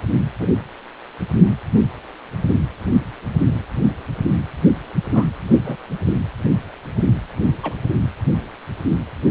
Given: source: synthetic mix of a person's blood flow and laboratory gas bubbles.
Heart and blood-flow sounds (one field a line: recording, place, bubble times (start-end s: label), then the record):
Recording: Doppler ultrasound of blood flow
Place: precordium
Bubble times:
0.40-0.51 s: bubbles
5.13-5.25 s: bubbles
5.63-5.76 s: bubbles
7.63-7.75 s: bubbles
From the record:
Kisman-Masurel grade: 122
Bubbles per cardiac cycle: 1 to 2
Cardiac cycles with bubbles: 10 to 50%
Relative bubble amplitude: moderate (0.250 to 0.450)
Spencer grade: 2 (many but less than half of the cardiac periods contain bubble signals, singularly or in groups)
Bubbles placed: anywhere in the cardiac cycle